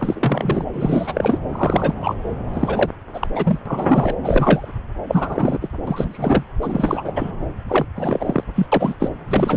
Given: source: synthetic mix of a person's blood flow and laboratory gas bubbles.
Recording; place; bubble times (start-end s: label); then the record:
Doppler ultrasound of blood flow; subclavian vein
0.00-0.65 s: bubbles
0.73-1.39 s: bubbles
1.50-1.94 s: bubbles
2.00-2.15 s: bubbles
2.53-2.90 s: bubbles
3.13-3.27 s: bubbles
3.35-3.59 s: bubbles
3.66-4.16 s: bubbles
4.23-4.68 s: bubbles
5.08-5.58 s: bubbles
5.61-5.68 s: bubbles
5.87-6.44 s: bubbles
6.61-7.12 s: bubbles
7.16-7.31 s: bubbles
7.68-7.85 s: bubbles
7.95-8.44 s: bubbles
8.55-8.67 s: bubbles
8.72-8.95 s: bubbles
9.00-9.10 s: bubbles
9.28-9.57 s: bubbles
From the record:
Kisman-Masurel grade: 343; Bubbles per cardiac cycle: rolling drumbeat, 9 or more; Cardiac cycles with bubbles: 100%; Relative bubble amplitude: loud (0.450 to 0.775); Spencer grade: 3 (all of the cardiac periods contain showers or single bubble signals, but not dominating or overriding the cardiac motion signals); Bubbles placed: anywhere in the cardiac cycle